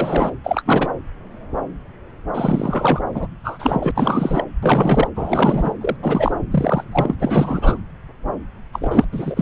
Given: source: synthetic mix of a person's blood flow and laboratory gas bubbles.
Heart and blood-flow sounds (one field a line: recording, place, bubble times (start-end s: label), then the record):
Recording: Doppler ultrasound of blood flow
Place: subclavian vein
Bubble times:
0.00-0.30 s: bubbles
0.43-0.62 s: bubbles
0.65-0.88 s: bubbles
2.33-3.00 s: bubbles
3.14-3.27 s: bubbles
3.44-3.92 s: bubbles
3.95-4.45 s: bubbles
4.62-5.08 s: bubbles
5.16-5.73 s: bubbles
5.81-5.96 s: bubbles
6.03-6.32 s: bubbles
6.50-6.84 s: bubbles
6.92-7.16 s: bubbles
7.20-7.79 s: bubbles
8.73-9.04 s: bubbles
9.12-9.41 s: bubbles
From the record:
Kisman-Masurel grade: 332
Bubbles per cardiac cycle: rolling drumbeat, 9 or more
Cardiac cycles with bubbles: 50 to 99%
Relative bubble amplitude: moderate (0.250 to 0.450)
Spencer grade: 3 (all of the cardiac periods contain showers or single bubble signals, but not dominating or overriding the cardiac motion signals)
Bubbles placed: anywhere in the cardiac cycle